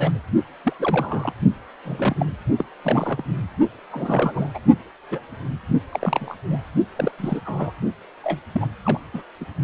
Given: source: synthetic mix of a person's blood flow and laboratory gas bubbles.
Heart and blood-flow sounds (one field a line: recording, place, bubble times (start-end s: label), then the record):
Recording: Doppler ultrasound of blood flow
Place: precordium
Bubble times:
0.00-0.19 s: bubbles
0.64-0.73 s: bubbles
0.79-1.33 s: bubbles
1.85-2.37 s: bubbles
2.58-2.65 s: bubbles
2.84-3.23 s: bubbles
3.92-4.49 s: bubbles
4.54-4.59 s: bubbles
5.11-5.20 s: bubbles
5.92-6.37 s: bubbles
6.50-6.62 s: bubbles
6.96-7.12 s: bubbles
7.18-7.41 s: bubbles
7.45-7.72 s: bubbles
8.23-8.40 s: bubbles
8.53-8.68 s: bubbles
8.84-8.99 s: bubbles
9.13-9.22 s: bubbles
9.40-9.45 s: bubbles
From the record:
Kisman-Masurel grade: 242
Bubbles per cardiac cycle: several, 3 to 8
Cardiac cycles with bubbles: 100%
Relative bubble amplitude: moderate (0.250 to 0.450)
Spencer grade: 3 (all of the cardiac periods contain showers or single bubble signals, but not dominating or overriding the cardiac motion signals)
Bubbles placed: only in the low amplitude regions of the cardiac cycle